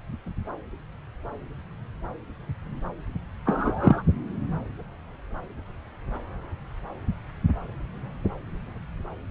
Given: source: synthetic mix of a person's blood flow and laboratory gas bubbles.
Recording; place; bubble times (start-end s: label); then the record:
Doppler ultrasound of blood flow; subclavian vein
3.46-4.02 s: bubbles
From the record:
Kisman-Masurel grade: 112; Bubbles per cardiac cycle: 1 to 2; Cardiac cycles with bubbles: 1 to 10%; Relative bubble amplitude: moderate (0.250 to 0.450); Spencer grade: 1 (occasional bubble signal discernible with the cardiac motion signal, with majority of cardiac periods free of bubbles); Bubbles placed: anywhere in the cardiac cycle